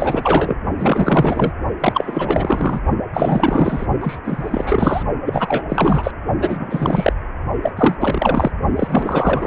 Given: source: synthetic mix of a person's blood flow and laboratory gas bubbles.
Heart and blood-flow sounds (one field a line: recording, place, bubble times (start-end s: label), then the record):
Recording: Doppler ultrasound of blood flow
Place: precordium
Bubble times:
0.00-0.56 s: bubbles
0.78-1.52 s: bubbles
1.80-2.79 s: bubbles
3.13-3.87 s: bubbles
4.00-4.19 s: bubbles
4.24-5.03 s: bubbles
5.25-5.65 s: bubbles
5.69-6.11 s: bubbles
6.38-7.12 s: bubbles
7.62-7.73 s: bubbles
7.76-7.96 s: bubbles
8.01-8.51 s: bubbles
8.76-9.47 s: bubbles
From the record:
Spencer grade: 4 (maximum detectable bubble signal sounding continuously throughout systole and diastole of every cardiac period, and overriding the amplitude of the normal cardiac signals)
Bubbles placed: only in the low amplitude regions of the cardiac cycle